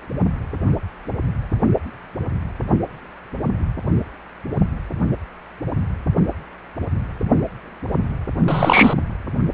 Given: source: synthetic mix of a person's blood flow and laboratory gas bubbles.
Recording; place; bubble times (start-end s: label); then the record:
Doppler ultrasound of blood flow; precordium
8.48-8.94 s: bubbles
From the record:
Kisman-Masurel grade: 213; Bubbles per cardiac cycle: several, 3 to 8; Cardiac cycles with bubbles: 1 to 10%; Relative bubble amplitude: loud (0.450 to 0.775); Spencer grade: 1 (occasional bubble signal discernible with the cardiac motion signal, with majority of cardiac periods free of bubbles); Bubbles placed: only in the low amplitude regions of the cardiac cycle